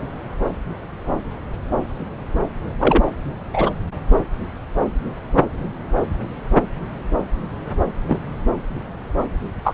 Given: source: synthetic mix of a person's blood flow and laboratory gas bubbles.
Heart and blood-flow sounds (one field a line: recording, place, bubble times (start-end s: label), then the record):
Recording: Doppler ultrasound of blood flow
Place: subclavian vein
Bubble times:
2.79-3.16 s: bubbles
3.53-3.71 s: bubbles
8.07-8.20 s: bubbles
9.63-9.74 s: bubbles
From the record:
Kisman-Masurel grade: 123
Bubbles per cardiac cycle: 1 to 2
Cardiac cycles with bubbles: 10 to 50%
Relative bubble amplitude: loud (0.450 to 0.775)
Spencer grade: 2 (many but less than half of the cardiac periods contain bubble signals, singularly or in groups)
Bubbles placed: anywhere in the cardiac cycle